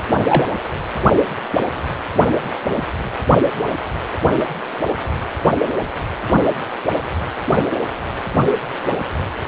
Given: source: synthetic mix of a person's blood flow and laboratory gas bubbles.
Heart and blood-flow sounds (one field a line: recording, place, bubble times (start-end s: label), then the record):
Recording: Doppler ultrasound of blood flow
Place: precordium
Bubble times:
0.27-0.46 s: bubbles
From the record:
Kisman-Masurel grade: 113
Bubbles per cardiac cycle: 1 to 2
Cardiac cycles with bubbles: 1 to 10%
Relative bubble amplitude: loud (0.450 to 0.775)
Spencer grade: 1 (occasional bubble signal discernible with the cardiac motion signal, with majority of cardiac periods free of bubbles)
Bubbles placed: anywhere in the cardiac cycle